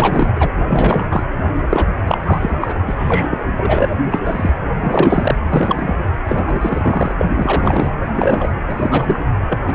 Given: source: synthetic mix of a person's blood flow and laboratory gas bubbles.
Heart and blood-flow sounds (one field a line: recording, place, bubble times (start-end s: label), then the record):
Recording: Doppler ultrasound of blood flow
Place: precordium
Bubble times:
0.00-0.53 s: bubbles
0.68-1.06 s: bubbles
1.10-1.23 s: bubbles
1.69-1.85 s: bubbles
2.07-2.17 s: bubbles
2.25-2.81 s: bubbles
2.87-2.94 s: bubbles
2.98-3.38 s: bubbles
3.57-3.89 s: bubbles
4.11-4.19 s: bubbles
4.24-4.53 s: bubbles
4.80-5.35 s: bubbles
5.48-5.96 s: bubbles
6.26-6.44 s: bubbles
6.46-7.12 s: bubbles
7.18-7.25 s: bubbles
7.34-7.92 s: bubbles
8.15-8.51 s: bubbles
8.67-9.24 s: bubbles
9.49-9.59 s: bubbles
9.67-9.74 s: bubbles
From the record:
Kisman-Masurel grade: 343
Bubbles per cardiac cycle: rolling drumbeat, 9 or more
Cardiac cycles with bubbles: 100%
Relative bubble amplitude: loud (0.450 to 0.775)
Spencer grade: 3 (all of the cardiac periods contain showers or single bubble signals, but not dominating or overriding the cardiac motion signals)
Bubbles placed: anywhere in the cardiac cycle